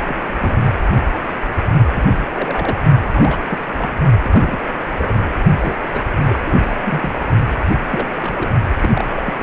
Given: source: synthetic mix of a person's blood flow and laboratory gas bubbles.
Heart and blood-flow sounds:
Doppler ultrasound of blood flow; precordium
0.01-0.16 s: bubbles
0.40-0.64 s: bubbles
1.92-2.23 s: bubbles
2.35-2.77 s: bubbles
3.12-3.43 s: bubbles
3.48-3.67 s: bubbles
3.78-3.98 s: bubbles
4.22-4.58 s: bubbles
4.75-5.13 s: bubbles
5.58-5.77 s: bubbles
5.92-6.01 s: bubbles
6.24-6.39 s: bubbles
6.42-6.75 s: bubbles
6.85-7.13 s: bubbles
7.90-8.07 s: bubbles
8.21-8.49 s: bubbles
8.83-9.04 s: bubbles
9.16-9.42 s: bubbles
From the record:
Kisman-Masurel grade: 232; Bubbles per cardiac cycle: several, 3 to 8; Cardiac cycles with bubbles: 50 to 99%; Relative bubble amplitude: moderate (0.250 to 0.450); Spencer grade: 3 (all of the cardiac periods contain showers or single bubble signals, but not dominating or overriding the cardiac motion signals); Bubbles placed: only in the low amplitude regions of the cardiac cycle

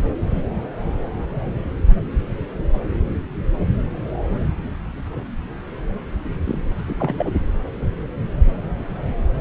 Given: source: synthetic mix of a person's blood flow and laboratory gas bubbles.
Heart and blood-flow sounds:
Doppler ultrasound of blood flow; subclavian vein
6.45-6.62 s: bubbles
6.87-7.32 s: bubbles
From the record:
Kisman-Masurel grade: 212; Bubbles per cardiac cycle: several, 3 to 8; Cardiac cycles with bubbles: 1 to 10%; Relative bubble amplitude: moderate (0.250 to 0.450); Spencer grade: 1 (occasional bubble signal discernible with the cardiac motion signal, with majority of cardiac periods free of bubbles); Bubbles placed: anywhere in the cardiac cycle

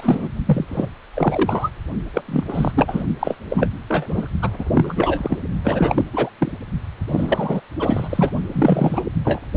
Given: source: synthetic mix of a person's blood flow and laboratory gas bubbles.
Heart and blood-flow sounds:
Doppler ultrasound of blood flow; precordium
0.00-0.28 s: bubbles
0.46-0.65 s: bubbles
0.68-0.89 s: bubbles
1.14-1.69 s: bubbles
2.13-2.21 s: bubbles
2.28-2.44 s: bubbles
2.48-2.72 s: bubbles
2.76-3.03 s: bubbles
3.19-3.37 s: bubbles
3.49-3.69 s: bubbles
3.89-4.27 s: bubbles
4.42-4.49 s: bubbles
4.58-4.64 s: bubbles
4.75-5.38 s: bubbles
5.64-6.05 s: bubbles
6.12-6.29 s: bubbles
6.38-6.52 s: bubbles
7.07-7.60 s: bubbles
7.79-8.31 s: bubbles
8.52-9.02 s: bubbles
9.24-9.40 s: bubbles
From the record:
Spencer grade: 3 (all of the cardiac periods contain showers or single bubble signals, but not dominating or overriding the cardiac motion signals); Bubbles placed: only in the low amplitude regions of the cardiac cycle

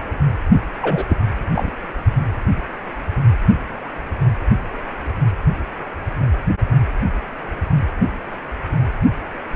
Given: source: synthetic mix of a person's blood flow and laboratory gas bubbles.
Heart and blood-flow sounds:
Doppler ultrasound of blood flow; precordium
0.81-1.17 s: bubbles
1.55-1.71 s: bubbles
From the record:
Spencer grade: 1 (occasional bubble signal discernible with the cardiac motion signal, with majority of cardiac periods free of bubbles); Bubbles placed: only in the low amplitude regions of the cardiac cycle

